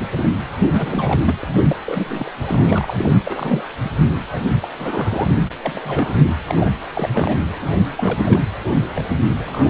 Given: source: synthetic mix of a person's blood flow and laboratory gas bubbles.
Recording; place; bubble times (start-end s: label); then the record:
Doppler ultrasound of blood flow; precordium
0.15-0.30 s: bubbles
0.65-1.22 s: bubbles
1.25-1.34 s: bubbles
1.43-1.48 s: bubbles
1.55-1.62 s: bubbles
1.69-1.76 s: bubbles
1.85-2.30 s: bubbles
2.46-3.13 s: bubbles
3.24-3.65 s: bubbles
3.83-3.90 s: bubbles
4.31-4.46 s: bubbles
4.62-4.68 s: bubbles
4.78-5.38 s: bubbles
5.65-6.25 s: bubbles
6.47-6.70 s: bubbles
6.95-7.40 s: bubbles
7.60-7.70 s: bubbles
7.96-8.40 s: bubbles
8.95-9.03 s: bubbles
9.29-9.70 s: bubbles
From the record:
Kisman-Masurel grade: 342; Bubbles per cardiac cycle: rolling drumbeat, 9 or more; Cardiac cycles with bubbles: 100%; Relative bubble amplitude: moderate (0.250 to 0.450); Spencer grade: 3 (all of the cardiac periods contain showers or single bubble signals, but not dominating or overriding the cardiac motion signals); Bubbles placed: anywhere in the cardiac cycle